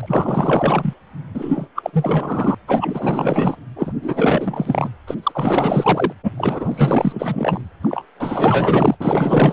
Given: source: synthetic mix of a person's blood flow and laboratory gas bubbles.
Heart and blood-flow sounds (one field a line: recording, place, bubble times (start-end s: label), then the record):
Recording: Doppler ultrasound of blood flow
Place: precordium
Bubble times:
0.00-0.94 s: bubbles
1.34-1.68 s: bubbles
1.75-1.90 s: bubbles
1.93-2.55 s: bubbles
2.67-3.56 s: bubbles
3.75-3.94 s: bubbles
4.01-4.90 s: bubbles
5.07-5.15 s: bubbles
5.23-6.12 s: bubbles
6.23-6.32 s: bubbles
6.38-7.61 s: bubbles
7.82-8.02 s: bubbles
8.19-8.96 s: bubbles
9.00-9.53 s: bubbles
From the record:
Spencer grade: 4 (maximum detectable bubble signal sounding continuously throughout systole and diastole of every cardiac period, and overriding the amplitude of the normal cardiac signals)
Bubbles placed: anywhere in the cardiac cycle